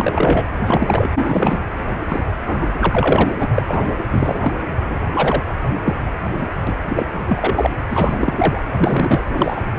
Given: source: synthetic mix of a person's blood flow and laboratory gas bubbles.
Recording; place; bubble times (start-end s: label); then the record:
Doppler ultrasound of blood flow; precordium
0.00-0.45 s: bubbles
0.65-1.09 s: bubbles
1.16-1.59 s: bubbles
2.09-2.23 s: bubbles
2.44-2.77 s: bubbles
2.81-3.35 s: bubbles
3.39-3.48 s: bubbles
3.54-3.62 s: bubbles
3.68-3.90 s: bubbles
4.10-4.52 s: bubbles
4.85-5.04 s: bubbles
5.13-5.43 s: bubbles
5.85-5.96 s: bubbles
6.40-6.49 s: bubbles
6.67-6.76 s: bubbles
6.89-7.06 s: bubbles
7.26-7.71 s: bubbles
7.89-8.61 s: bubbles
8.78-9.22 s: bubbles
9.30-9.66 s: bubbles
From the record:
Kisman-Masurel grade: 243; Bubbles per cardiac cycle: several, 3 to 8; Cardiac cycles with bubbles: 100%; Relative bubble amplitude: loud (0.450 to 0.775); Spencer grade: 3 (all of the cardiac periods contain showers or single bubble signals, but not dominating or overriding the cardiac motion signals); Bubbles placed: anywhere in the cardiac cycle